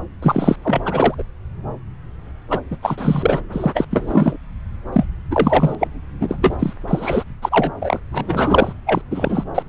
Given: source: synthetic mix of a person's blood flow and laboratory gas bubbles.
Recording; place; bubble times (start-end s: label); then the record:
Doppler ultrasound of blood flow; subclavian vein
0.22-0.56 s: bubbles
0.64-0.81 s: bubbles
0.85-1.15 s: bubbles
1.18-1.23 s: bubbles
2.50-2.60 s: bubbles
2.71-2.76 s: bubbles
2.82-3.41 s: bubbles
3.52-3.85 s: bubbles
3.90-4.37 s: bubbles
4.93-5.04 s: bubbles
5.31-5.75 s: bubbles
5.79-5.88 s: bubbles
6.21-6.37 s: bubbles
6.41-6.74 s: bubbles
6.88-7.24 s: bubbles
7.42-7.72 s: bubbles
7.82-7.99 s: bubbles
8.12-8.73 s: bubbles
8.86-9.01 s: bubbles
9.10-9.44 s: bubbles
9.54-9.62 s: bubbles
From the record:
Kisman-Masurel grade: 333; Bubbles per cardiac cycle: rolling drumbeat, 9 or more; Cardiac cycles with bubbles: 50 to 99%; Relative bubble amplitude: loud (0.450 to 0.775); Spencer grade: 3 (all of the cardiac periods contain showers or single bubble signals, but not dominating or overriding the cardiac motion signals); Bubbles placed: anywhere in the cardiac cycle